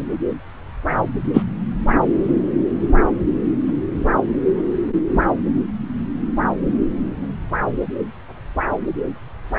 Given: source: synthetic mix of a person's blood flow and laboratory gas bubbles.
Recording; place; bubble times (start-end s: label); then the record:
Doppler ultrasound of blood flow; subclavian vein
1.33-1.42 s: bubbles
From the record:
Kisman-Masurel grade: 123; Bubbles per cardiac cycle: 1 to 2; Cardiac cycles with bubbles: 10 to 50%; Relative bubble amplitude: loud (0.450 to 0.775); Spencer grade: 2 (many but less than half of the cardiac periods contain bubble signals, singularly or in groups); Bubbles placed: anywhere in the cardiac cycle